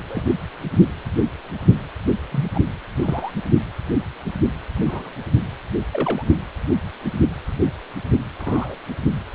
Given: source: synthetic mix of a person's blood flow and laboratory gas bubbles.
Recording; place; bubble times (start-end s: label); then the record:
Doppler ultrasound of blood flow; precordium
0.09-0.29 s: bubbles
2.32-2.47 s: bubbles
2.54-2.61 s: bubbles
3.03-3.32 s: bubbles
4.85-5.12 s: bubbles
5.92-6.23 s: bubbles
8.38-8.76 s: bubbles
From the record:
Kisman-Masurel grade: 122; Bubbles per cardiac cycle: 1 to 2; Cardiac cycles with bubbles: 10 to 50%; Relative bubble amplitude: moderate (0.250 to 0.450); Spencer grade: 2 (many but less than half of the cardiac periods contain bubble signals, singularly or in groups); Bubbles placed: anywhere in the cardiac cycle